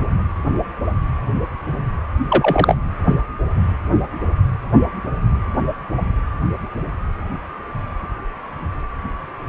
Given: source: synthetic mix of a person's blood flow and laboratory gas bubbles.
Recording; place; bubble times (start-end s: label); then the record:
Doppler ultrasound of blood flow; precordium
2.28-2.78 s: bubbles
From the record:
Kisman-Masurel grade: 213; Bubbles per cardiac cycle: several, 3 to 8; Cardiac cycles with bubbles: 1 to 10%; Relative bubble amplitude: loud (0.450 to 0.775); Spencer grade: 1 (occasional bubble signal discernible with the cardiac motion signal, with majority of cardiac periods free of bubbles); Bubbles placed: anywhere in the cardiac cycle